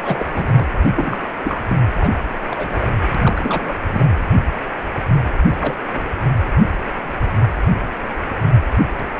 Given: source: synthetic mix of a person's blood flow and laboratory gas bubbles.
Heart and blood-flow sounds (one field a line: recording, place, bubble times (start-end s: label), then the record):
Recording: Doppler ultrasound of blood flow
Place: precordium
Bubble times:
0.02-0.27 s: bubbles
0.33-0.67 s: bubbles
0.96-1.18 s: bubbles
1.44-1.63 s: bubbles
1.68-1.78 s: bubbles
2.00-2.12 s: bubbles
2.51-2.92 s: bubbles
3.15-3.76 s: bubbles
3.86-4.07 s: bubbles
5.61-5.75 s: bubbles
5.92-6.04 s: bubbles
From the record:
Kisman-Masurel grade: 232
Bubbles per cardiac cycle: several, 3 to 8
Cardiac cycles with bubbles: 50 to 99%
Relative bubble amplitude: moderate (0.250 to 0.450)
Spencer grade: 3 (all of the cardiac periods contain showers or single bubble signals, but not dominating or overriding the cardiac motion signals)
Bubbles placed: anywhere in the cardiac cycle